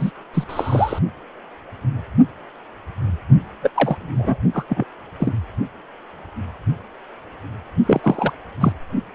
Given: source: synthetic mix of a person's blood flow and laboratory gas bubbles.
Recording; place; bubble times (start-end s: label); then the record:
Doppler ultrasound of blood flow; precordium
0.00-0.11 s: bubbles
0.33-0.44 s: bubbles
0.49-0.98 s: bubbles
3.63-3.71 s: bubbles
3.74-4.38 s: bubbles
4.53-4.64 s: bubbles
4.69-4.84 s: bubbles
5.19-5.32 s: bubbles
7.86-8.31 s: bubbles
8.61-8.72 s: bubbles
From the record:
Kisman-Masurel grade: 232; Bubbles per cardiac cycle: several, 3 to 8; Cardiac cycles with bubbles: 50 to 99%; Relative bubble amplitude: moderate (0.250 to 0.450); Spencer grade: 3 (all of the cardiac periods contain showers or single bubble signals, but not dominating or overriding the cardiac motion signals); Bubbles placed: only in the low amplitude regions of the cardiac cycle